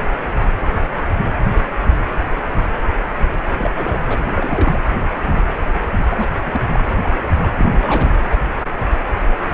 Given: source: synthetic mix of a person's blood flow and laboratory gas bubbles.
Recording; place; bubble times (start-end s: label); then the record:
Doppler ultrasound of blood flow; precordium
3.57-3.70 s: bubbles
3.75-4.02 s: bubbles
4.04-4.25 s: bubbles
4.35-4.78 s: bubbles
6.08-6.29 s: bubbles
6.45-6.61 s: bubbles
6.72-6.85 s: bubbles
7.04-7.12 s: bubbles
7.22-7.27 s: bubbles
7.38-8.11 s: bubbles
From the record:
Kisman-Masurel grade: 221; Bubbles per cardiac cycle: several, 3 to 8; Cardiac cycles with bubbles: 10 to 50%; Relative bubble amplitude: barely perceptible (0.100 to 0.250); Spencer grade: 2 (many but less than half of the cardiac periods contain bubble signals, singularly or in groups); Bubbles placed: anywhere in the cardiac cycle